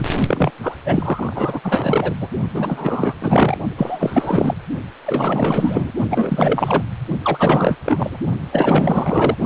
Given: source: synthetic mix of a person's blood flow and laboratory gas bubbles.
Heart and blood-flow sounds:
Doppler ultrasound of blood flow; precordium
0.00-0.06 s: bubbles
0.27-0.51 s: bubbles
0.63-0.77 s: bubbles
0.85-2.15 s: bubbles
2.21-2.29 s: bubbles
2.54-3.14 s: bubbles
3.21-3.57 s: bubbles
3.77-4.54 s: bubbles
5.06-5.92 s: bubbles
6.10-6.82 s: bubbles
7.24-7.78 s: bubbles
7.84-8.17 s: bubbles
8.51-9.35 s: bubbles
From the record:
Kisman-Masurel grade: 444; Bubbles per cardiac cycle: continuous sound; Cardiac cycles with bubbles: 100%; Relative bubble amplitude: maximal (0.775 to 0.999); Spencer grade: 4 (maximum detectable bubble signal sounding continuously throughout systole and diastole of every cardiac period, and overriding the amplitude of the normal cardiac signals); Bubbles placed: only in the low amplitude regions of the cardiac cycle

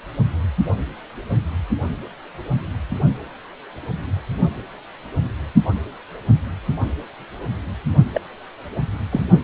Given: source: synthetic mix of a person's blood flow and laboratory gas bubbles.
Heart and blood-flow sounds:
Doppler ultrasound of blood flow; precordium
8.14-8.21 s: bubbles
9.12-9.26 s: bubbles
From the record:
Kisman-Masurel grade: 112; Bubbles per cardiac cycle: 1 to 2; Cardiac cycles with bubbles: 1 to 10%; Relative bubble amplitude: moderate (0.250 to 0.450); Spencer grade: 1 (occasional bubble signal discernible with the cardiac motion signal, with majority of cardiac periods free of bubbles); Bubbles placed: only in the low amplitude regions of the cardiac cycle

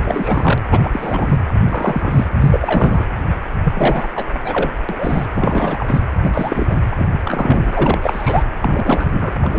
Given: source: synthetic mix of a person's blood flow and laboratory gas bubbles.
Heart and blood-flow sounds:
Doppler ultrasound of blood flow; precordium
0.03-0.61 s: bubbles
0.70-1.36 s: bubbles
1.68-2.26 s: bubbles
2.42-3.04 s: bubbles
3.64-4.08 s: bubbles
4.15-4.25 s: bubbles
4.44-4.72 s: bubbles
4.88-5.26 s: bubbles
5.34-6.01 s: bubbles
6.23-6.78 s: bubbles
6.91-7.07 s: bubbles
7.19-7.98 s: bubbles
8.02-8.43 s: bubbles
8.62-9.32 s: bubbles
9.41-9.59 s: bubbles
From the record:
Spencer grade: 3 (all of the cardiac periods contain showers or single bubble signals, but not dominating or overriding the cardiac motion signals); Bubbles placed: anywhere in the cardiac cycle

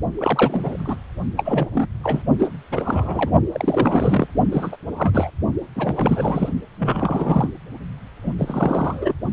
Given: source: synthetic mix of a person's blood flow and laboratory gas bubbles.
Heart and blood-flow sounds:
Doppler ultrasound of blood flow; precordium
0.18-0.96 s: bubbles
1.37-1.70 s: bubbles
1.74-1.87 s: bubbles
2.04-2.22 s: bubbles
2.39-2.48 s: bubbles
2.71-3.33 s: bubbles
3.52-4.28 s: bubbles
4.51-4.76 s: bubbles
4.96-5.30 s: bubbles
5.75-6.49 s: bubbles
6.79-7.50 s: bubbles
8.23-8.36 s: bubbles
8.38-9.14 s: bubbles
From the record:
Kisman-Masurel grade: 342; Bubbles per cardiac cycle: rolling drumbeat, 9 or more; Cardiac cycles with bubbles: 100%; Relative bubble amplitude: moderate (0.250 to 0.450); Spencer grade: 3 (all of the cardiac periods contain showers or single bubble signals, but not dominating or overriding the cardiac motion signals); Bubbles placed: only in the low amplitude regions of the cardiac cycle

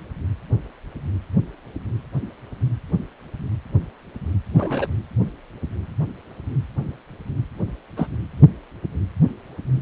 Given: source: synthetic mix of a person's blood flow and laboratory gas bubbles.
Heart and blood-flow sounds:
Doppler ultrasound of blood flow; precordium
4.54-4.87 s: bubbles
7.97-8.07 s: bubbles
From the record:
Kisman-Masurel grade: 122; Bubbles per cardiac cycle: 1 to 2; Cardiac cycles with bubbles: 10 to 50%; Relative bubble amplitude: moderate (0.250 to 0.450); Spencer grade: 2 (many but less than half of the cardiac periods contain bubble signals, singularly or in groups); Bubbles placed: anywhere in the cardiac cycle

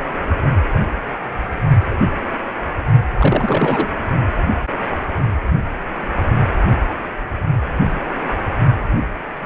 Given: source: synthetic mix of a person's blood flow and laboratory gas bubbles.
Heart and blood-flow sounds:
Doppler ultrasound of blood flow; precordium
3.18-3.88 s: bubbles
From the record:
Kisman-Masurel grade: 223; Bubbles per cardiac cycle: several, 3 to 8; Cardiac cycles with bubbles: 10 to 50%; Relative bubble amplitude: loud (0.450 to 0.775); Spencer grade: 2 (many but less than half of the cardiac periods contain bubble signals, singularly or in groups); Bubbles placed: only in the low amplitude regions of the cardiac cycle

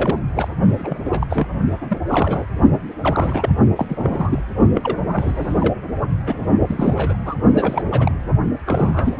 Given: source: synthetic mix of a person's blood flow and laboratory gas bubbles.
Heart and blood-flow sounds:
Doppler ultrasound of blood flow; precordium
0.00-0.18 s: bubbles
0.34-0.48 s: bubbles
0.77-0.99 s: bubbles
1.05-1.27 s: bubbles
1.30-1.47 s: bubbles
1.82-1.98 s: bubbles
2.08-2.45 s: bubbles
3.00-3.49 s: bubbles
3.75-3.87 s: bubbles
3.89-4.42 s: bubbles
4.74-4.98 s: bubbles
5.13-5.58 s: bubbles
5.60-5.76 s: bubbles
6.26-6.35 s: bubbles
6.67-7.16 s: bubbles
7.25-7.35 s: bubbles
7.56-7.83 s: bubbles
7.91-8.12 s: bubbles
8.66-9.18 s: bubbles
From the record:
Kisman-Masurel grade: 342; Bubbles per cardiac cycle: rolling drumbeat, 9 or more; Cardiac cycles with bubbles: 100%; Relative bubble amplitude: moderate (0.250 to 0.450); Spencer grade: 3 (all of the cardiac periods contain showers or single bubble signals, but not dominating or overriding the cardiac motion signals); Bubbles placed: only in the low amplitude regions of the cardiac cycle

